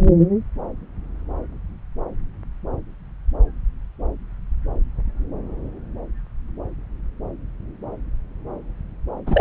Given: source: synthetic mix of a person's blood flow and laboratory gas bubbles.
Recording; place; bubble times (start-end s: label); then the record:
Doppler ultrasound of blood flow; subclavian vein
9.26-9.41 s: bubbles
From the record:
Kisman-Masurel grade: 213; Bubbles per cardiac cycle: several, 3 to 8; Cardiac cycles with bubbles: 1 to 10%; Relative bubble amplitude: loud (0.450 to 0.775); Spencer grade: 1 (occasional bubble signal discernible with the cardiac motion signal, with majority of cardiac periods free of bubbles); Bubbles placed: anywhere in the cardiac cycle